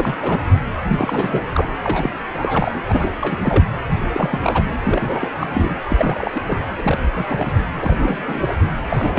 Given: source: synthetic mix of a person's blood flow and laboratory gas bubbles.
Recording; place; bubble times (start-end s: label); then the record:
Doppler ultrasound of blood flow; precordium
0.00-0.41 s: bubbles
0.87-1.42 s: bubbles
1.52-1.70 s: bubbles
1.83-2.11 s: bubbles
2.33-2.79 s: bubbles
2.85-3.38 s: bubbles
3.43-3.64 s: bubbles
4.12-4.40 s: bubbles
4.43-4.70 s: bubbles
4.80-5.29 s: bubbles
5.39-5.47 s: bubbles
5.53-5.74 s: bubbles
5.89-6.42 s: bubbles
6.47-6.67 s: bubbles
6.77-6.98 s: bubbles
7.14-7.52 s: bubbles
7.79-8.59 s: bubbles
8.74-9.19 s: bubbles
From the record:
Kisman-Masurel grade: 342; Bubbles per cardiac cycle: rolling drumbeat, 9 or more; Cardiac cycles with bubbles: 100%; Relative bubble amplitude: moderate (0.250 to 0.450); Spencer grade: 3 (all of the cardiac periods contain showers or single bubble signals, but not dominating or overriding the cardiac motion signals); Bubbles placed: anywhere in the cardiac cycle